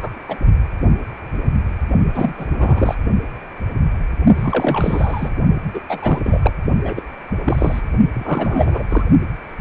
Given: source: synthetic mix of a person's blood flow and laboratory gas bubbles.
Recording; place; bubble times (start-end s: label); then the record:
Doppler ultrasound of blood flow; precordium
0.00-0.20 s: bubbles
0.28-0.38 s: bubbles
2.13-2.33 s: bubbles
2.38-2.46 s: bubbles
2.52-2.97 s: bubbles
4.35-5.31 s: bubbles
5.74-5.80 s: bubbles
5.89-6.20 s: bubbles
6.24-6.53 s: bubbles
6.85-7.02 s: bubbles
7.46-7.81 s: bubbles
8.14-8.83 s: bubbles
8.89-9.04 s: bubbles
From the record:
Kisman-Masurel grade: 333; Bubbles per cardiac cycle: rolling drumbeat, 9 or more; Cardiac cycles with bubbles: 50 to 99%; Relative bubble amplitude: loud (0.450 to 0.775); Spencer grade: 3 (all of the cardiac periods contain showers or single bubble signals, but not dominating or overriding the cardiac motion signals); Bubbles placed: only in the low amplitude regions of the cardiac cycle